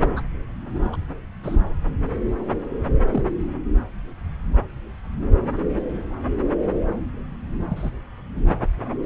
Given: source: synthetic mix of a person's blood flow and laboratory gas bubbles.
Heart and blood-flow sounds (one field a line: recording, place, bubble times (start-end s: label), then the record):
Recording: Doppler ultrasound of blood flow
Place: subclavian vein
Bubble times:
0.15-0.22 s: bubbles
0.92-0.96 s: bubbles
1.43-1.56 s: bubbles
3.00-3.21 s: bubbles
7.69-7.90 s: bubbles
9.04-9.06 s: bubbles
From the record:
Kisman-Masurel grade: 121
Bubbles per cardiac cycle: 1 to 2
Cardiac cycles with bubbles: 10 to 50%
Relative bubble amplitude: barely perceptible (0.100 to 0.250)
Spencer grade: 2 (many but less than half of the cardiac periods contain bubble signals, singularly or in groups)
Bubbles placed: anywhere in the cardiac cycle